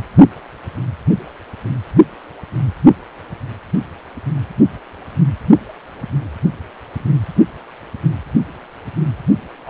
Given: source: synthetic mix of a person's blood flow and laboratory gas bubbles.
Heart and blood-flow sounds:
Doppler ultrasound of blood flow; precordium
9.66-9.70 s: bubbles
From the record:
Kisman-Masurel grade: 211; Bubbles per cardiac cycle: several, 3 to 8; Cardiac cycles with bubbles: 1 to 10%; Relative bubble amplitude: barely perceptible (0.100 to 0.250); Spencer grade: 1 (occasional bubble signal discernible with the cardiac motion signal, with majority of cardiac periods free of bubbles); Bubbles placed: only in the low amplitude regions of the cardiac cycle

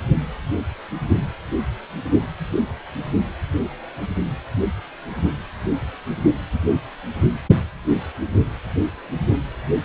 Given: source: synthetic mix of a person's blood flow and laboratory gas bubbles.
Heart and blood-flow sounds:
Doppler ultrasound of blood flow; precordium
no bubbles
From the record:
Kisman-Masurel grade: 000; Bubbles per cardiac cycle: 0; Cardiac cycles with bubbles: 0%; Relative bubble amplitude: no bubbles discernible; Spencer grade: 0 (complete lack of bubble signals)

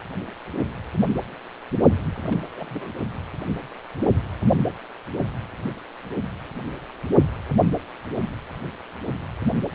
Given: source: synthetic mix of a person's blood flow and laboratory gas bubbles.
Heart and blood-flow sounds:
Doppler ultrasound of blood flow; precordium
0.00-0.03 s: bubbles
0.11-0.16 s: bubbles
1.90-1.99 s: bubbles
2.15-2.52 s: bubbles
2.56-2.92 s: bubbles
From the record:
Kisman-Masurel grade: 221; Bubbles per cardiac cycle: several, 3 to 8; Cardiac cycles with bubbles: 10 to 50%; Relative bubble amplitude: barely perceptible (0.100 to 0.250); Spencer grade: 2 (many but less than half of the cardiac periods contain bubble signals, singularly or in groups); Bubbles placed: only in the low amplitude regions of the cardiac cycle

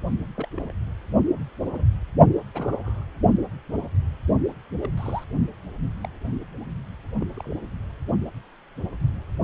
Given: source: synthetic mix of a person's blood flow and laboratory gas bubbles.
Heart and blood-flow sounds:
Doppler ultrasound of blood flow; precordium
0.35-0.48 s: bubbles
0.57-0.73 s: bubbles
1.65-1.84 s: bubbles
2.55-3.04 s: bubbles
4.79-4.89 s: bubbles
4.97-5.23 s: bubbles
6.03-6.08 s: bubbles
7.21-7.26 s: bubbles
7.35-7.54 s: bubbles
From the record:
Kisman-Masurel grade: 121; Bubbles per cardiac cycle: 1 to 2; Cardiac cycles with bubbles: 10 to 50%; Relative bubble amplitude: barely perceptible (0.100 to 0.250); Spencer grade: 2 (many but less than half of the cardiac periods contain bubble signals, singularly or in groups); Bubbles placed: only in the low amplitude regions of the cardiac cycle

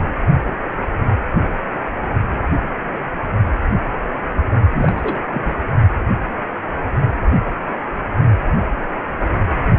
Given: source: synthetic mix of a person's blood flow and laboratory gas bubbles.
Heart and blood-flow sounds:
Doppler ultrasound of blood flow; precordium
4.70-5.21 s: bubbles
5.31-5.55 s: bubbles
From the record:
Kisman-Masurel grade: 212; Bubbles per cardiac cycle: several, 3 to 8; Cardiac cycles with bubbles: 1 to 10%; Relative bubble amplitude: moderate (0.250 to 0.450); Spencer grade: 1 (occasional bubble signal discernible with the cardiac motion signal, with majority of cardiac periods free of bubbles); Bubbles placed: only in the low amplitude regions of the cardiac cycle

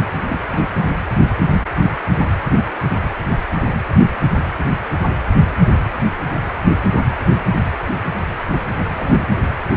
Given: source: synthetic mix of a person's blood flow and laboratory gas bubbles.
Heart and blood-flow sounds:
Doppler ultrasound of blood flow; precordium
0.30-0.39 s: bubbles
0.50-0.65 s: bubbles
8.87-9.26 s: bubbles
From the record:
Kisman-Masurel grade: 221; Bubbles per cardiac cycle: several, 3 to 8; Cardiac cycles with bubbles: 10 to 50%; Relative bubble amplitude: barely perceptible (0.100 to 0.250); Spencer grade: 2 (many but less than half of the cardiac periods contain bubble signals, singularly or in groups); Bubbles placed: anywhere in the cardiac cycle

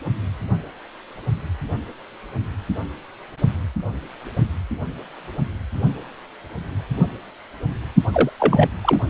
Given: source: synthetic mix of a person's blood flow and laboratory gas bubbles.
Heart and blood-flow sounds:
Doppler ultrasound of blood flow; precordium
8.13-8.30 s: bubbles
8.40-8.69 s: bubbles
8.83-9.01 s: bubbles
From the record:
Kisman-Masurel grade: 213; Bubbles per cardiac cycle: several, 3 to 8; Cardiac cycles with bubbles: 1 to 10%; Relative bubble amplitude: loud (0.450 to 0.775); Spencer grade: 1 (occasional bubble signal discernible with the cardiac motion signal, with majority of cardiac periods free of bubbles); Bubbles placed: only in the low amplitude regions of the cardiac cycle

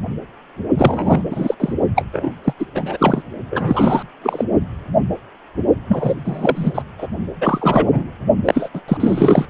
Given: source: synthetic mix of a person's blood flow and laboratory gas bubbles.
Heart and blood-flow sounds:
Doppler ultrasound of blood flow; precordium
0.77-1.23 s: bubbles
1.31-1.55 s: bubbles
1.60-1.73 s: bubbles
1.95-2.04 s: bubbles
2.13-2.31 s: bubbles
2.44-2.53 s: bubbles
2.59-2.66 s: bubbles
2.74-3.22 s: bubbles
3.50-4.03 s: bubbles
4.23-4.44 s: bubbles
5.88-6.15 s: bubbles
6.25-6.83 s: bubbles
6.98-7.07 s: bubbles
7.41-8.11 s: bubbles
8.45-8.69 s: bubbles
8.73-8.81 s: bubbles
8.88-8.97 s: bubbles
9.00-9.47 s: bubbles
From the record:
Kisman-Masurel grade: 333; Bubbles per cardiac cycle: rolling drumbeat, 9 or more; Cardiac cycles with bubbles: 50 to 99%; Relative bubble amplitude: loud (0.450 to 0.775); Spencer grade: 3 (all of the cardiac periods contain showers or single bubble signals, but not dominating or overriding the cardiac motion signals); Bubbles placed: only in the low amplitude regions of the cardiac cycle

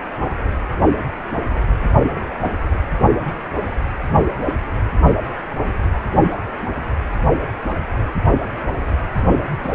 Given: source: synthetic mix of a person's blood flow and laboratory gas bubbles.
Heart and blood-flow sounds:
Doppler ultrasound of blood flow; precordium
2.44-2.51 s: bubbles
9.62-9.73 s: bubbles
From the record:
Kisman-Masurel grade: 122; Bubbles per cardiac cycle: 1 to 2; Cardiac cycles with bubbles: 10 to 50%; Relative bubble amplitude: moderate (0.250 to 0.450); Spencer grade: 2 (many but less than half of the cardiac periods contain bubble signals, singularly or in groups); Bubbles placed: anywhere in the cardiac cycle

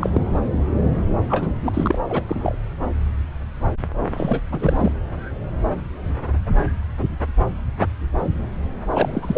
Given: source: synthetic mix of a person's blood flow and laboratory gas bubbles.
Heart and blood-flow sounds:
Doppler ultrasound of blood flow; subclavian vein
0.00-0.21 s: bubbles
0.29-0.38 s: bubbles
1.28-1.47 s: bubbles
1.60-1.96 s: bubbles
2.09-2.22 s: bubbles
2.27-2.56 s: bubbles
4.14-4.42 s: bubbles
4.51-4.95 s: bubbles
8.93-9.38 s: bubbles
From the record:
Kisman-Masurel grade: 222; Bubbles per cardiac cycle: several, 3 to 8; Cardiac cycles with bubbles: 10 to 50%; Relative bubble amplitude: moderate (0.250 to 0.450); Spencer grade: 2 (many but less than half of the cardiac periods contain bubble signals, singularly or in groups); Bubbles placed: anywhere in the cardiac cycle

